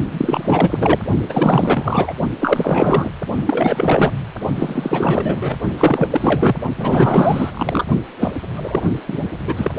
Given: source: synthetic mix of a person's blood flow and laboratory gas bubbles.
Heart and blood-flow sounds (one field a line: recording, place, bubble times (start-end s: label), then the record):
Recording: Doppler ultrasound of blood flow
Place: precordium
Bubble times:
0.11-1.03 s: bubbles
1.29-2.14 s: bubbles
2.40-3.10 s: bubbles
3.45-4.12 s: bubbles
4.55-5.59 s: bubbles
5.77-6.55 s: bubbles
6.75-7.50 s: bubbles
7.54-7.84 s: bubbles
8.20-8.32 s: bubbles
8.56-8.82 s: bubbles
9.08-9.19 s: bubbles
9.38-9.72 s: bubbles
From the record:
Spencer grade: 4 (maximum detectable bubble signal sounding continuously throughout systole and diastole of every cardiac period, and overriding the amplitude of the normal cardiac signals)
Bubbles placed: only in the low amplitude regions of the cardiac cycle